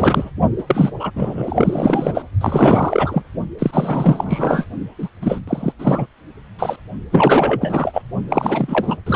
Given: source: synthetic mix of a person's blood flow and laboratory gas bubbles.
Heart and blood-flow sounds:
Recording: Doppler ultrasound of blood flow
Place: precordium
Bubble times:
0.00-0.30 s: bubbles
0.58-0.63 s: bubbles
0.67-0.90 s: bubbles
0.99-1.10 s: bubbles
1.15-2.23 s: bubbles
2.41-3.23 s: bubbles
3.58-4.67 s: bubbles
4.98-5.08 s: bubbles
5.21-5.39 s: bubbles
5.47-5.72 s: bubbles
5.78-6.06 s: bubbles
6.58-6.76 s: bubbles
7.11-8.02 s: bubbles
8.29-8.96 s: bubbles
9.06-9.16 s: bubbles
From the record:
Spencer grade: 4 (maximum detectable bubble signal sounding continuously throughout systole and diastole of every cardiac period, and overriding the amplitude of the normal cardiac signals)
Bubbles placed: only in the low amplitude regions of the cardiac cycle

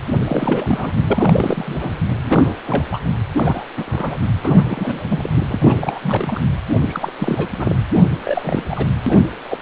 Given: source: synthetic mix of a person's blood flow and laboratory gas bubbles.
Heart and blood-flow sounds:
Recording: Doppler ultrasound of blood flow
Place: precordium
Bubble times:
0.17-0.93 s: bubbles
1.06-1.94 s: bubbles
1.98-2.02 s: bubbles
2.21-2.56 s: bubbles
2.63-3.00 s: bubbles
3.35-3.63 s: bubbles
3.77-4.20 s: bubbles
4.43-5.30 s: bubbles
5.35-5.44 s: bubbles
5.49-6.41 s: bubbles
6.80-7.12 s: bubbles
7.19-7.48 s: bubbles
7.56-7.80 s: bubbles
7.94-8.01 s: bubbles
8.24-8.62 s: bubbles
8.70-8.87 s: bubbles
9.06-9.19 s: bubbles
9.50-9.57 s: bubbles
From the record:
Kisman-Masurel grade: 342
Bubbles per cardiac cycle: rolling drumbeat, 9 or more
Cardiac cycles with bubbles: 100%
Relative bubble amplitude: moderate (0.250 to 0.450)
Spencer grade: 3 (all of the cardiac periods contain showers or single bubble signals, but not dominating or overriding the cardiac motion signals)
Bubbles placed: anywhere in the cardiac cycle

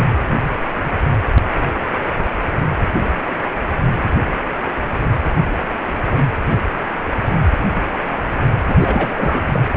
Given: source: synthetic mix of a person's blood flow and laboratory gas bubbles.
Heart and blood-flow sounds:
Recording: Doppler ultrasound of blood flow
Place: precordium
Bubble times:
8.68-8.75 s: bubbles
8.79-9.39 s: bubbles
9.52-9.62 s: bubbles
From the record:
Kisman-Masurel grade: 212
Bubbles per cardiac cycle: several, 3 to 8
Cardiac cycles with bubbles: 1 to 10%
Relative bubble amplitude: moderate (0.250 to 0.450)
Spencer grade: 1 (occasional bubble signal discernible with the cardiac motion signal, with majority of cardiac periods free of bubbles)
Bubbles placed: anywhere in the cardiac cycle

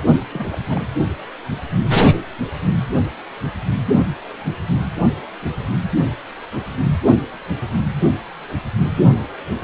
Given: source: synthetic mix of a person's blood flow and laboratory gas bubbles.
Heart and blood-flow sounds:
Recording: Doppler ultrasound of blood flow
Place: precordium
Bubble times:
0.31-0.47 s: bubbles
0.52-0.58 s: bubbles
0.67-0.83 s: bubbles
From the record:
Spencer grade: 2 (many but less than half of the cardiac periods contain bubble signals, singularly or in groups)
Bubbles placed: only in the low amplitude regions of the cardiac cycle

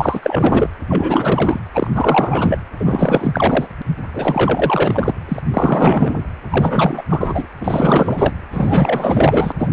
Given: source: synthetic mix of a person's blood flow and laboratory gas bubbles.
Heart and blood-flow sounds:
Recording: Doppler ultrasound of blood flow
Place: precordium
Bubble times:
0.00-0.68 s: bubbles
0.89-1.59 s: bubbles
1.73-1.91 s: bubbles
1.94-2.58 s: bubbles
2.80-3.67 s: bubbles
4.13-5.14 s: bubbles
5.28-5.42 s: bubbles
5.54-6.25 s: bubbles
6.49-7.03 s: bubbles
7.09-7.46 s: bubbles
7.60-8.33 s: bubbles
8.51-9.52 s: bubbles
9.58-9.68 s: bubbles
From the record:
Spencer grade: 4 (maximum detectable bubble signal sounding continuously throughout systole and diastole of every cardiac period, and overriding the amplitude of the normal cardiac signals)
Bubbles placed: anywhere in the cardiac cycle

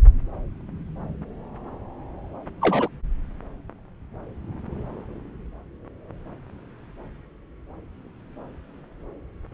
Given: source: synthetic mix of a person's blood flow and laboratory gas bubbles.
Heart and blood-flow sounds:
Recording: Doppler ultrasound of blood flow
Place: subclavian vein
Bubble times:
2.61-2.88 s: bubbles
From the record:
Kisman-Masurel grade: 113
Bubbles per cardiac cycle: 1 to 2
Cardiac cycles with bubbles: 1 to 10%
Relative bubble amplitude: loud (0.450 to 0.775)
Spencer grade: 1 (occasional bubble signal discernible with the cardiac motion signal, with majority of cardiac periods free of bubbles)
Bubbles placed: anywhere in the cardiac cycle

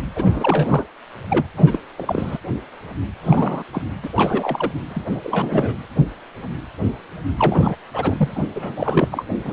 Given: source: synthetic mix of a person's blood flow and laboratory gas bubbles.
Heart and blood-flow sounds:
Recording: Doppler ultrasound of blood flow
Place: precordium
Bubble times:
0.15-0.89 s: bubbles
1.30-1.45 s: bubbles
1.57-1.79 s: bubbles
1.96-2.38 s: bubbles
3.23-3.63 s: bubbles
3.73-3.82 s: bubbles
4.02-4.09 s: bubbles
4.16-4.71 s: bubbles
4.88-5.05 s: bubbles
5.12-5.20 s: bubbles
5.23-5.75 s: bubbles
7.38-7.75 s: bubbles
7.93-8.45 s: bubbles
8.55-9.08 s: bubbles
9.12-9.25 s: bubbles
9.45-9.53 s: bubbles
From the record:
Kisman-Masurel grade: 332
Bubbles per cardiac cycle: rolling drumbeat, 9 or more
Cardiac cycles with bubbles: 50 to 99%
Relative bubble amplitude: moderate (0.250 to 0.450)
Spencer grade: 3 (all of the cardiac periods contain showers or single bubble signals, but not dominating or overriding the cardiac motion signals)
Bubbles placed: anywhere in the cardiac cycle

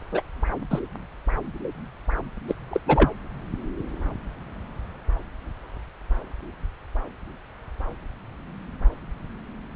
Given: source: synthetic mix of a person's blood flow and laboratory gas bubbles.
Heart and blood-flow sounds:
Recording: Doppler ultrasound of blood flow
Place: subclavian vein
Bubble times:
0.12-0.22 s: bubbles
0.70-0.80 s: bubbles
2.48-2.54 s: bubbles
2.71-2.80 s: bubbles
2.86-3.10 s: bubbles
From the record:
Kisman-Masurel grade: 222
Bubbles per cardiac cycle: several, 3 to 8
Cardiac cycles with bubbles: 10 to 50%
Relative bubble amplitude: moderate (0.250 to 0.450)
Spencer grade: 2 (many but less than half of the cardiac periods contain bubble signals, singularly or in groups)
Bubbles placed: anywhere in the cardiac cycle

